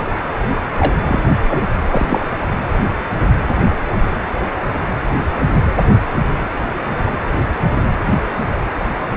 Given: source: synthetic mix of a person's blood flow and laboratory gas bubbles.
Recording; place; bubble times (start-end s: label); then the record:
Doppler ultrasound of blood flow; precordium
0.78-0.93 s: bubbles
1.07-1.20 s: bubbles
1.48-1.64 s: bubbles
1.90-2.25 s: bubbles
From the record:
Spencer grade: 1 (occasional bubble signal discernible with the cardiac motion signal, with majority of cardiac periods free of bubbles); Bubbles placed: anywhere in the cardiac cycle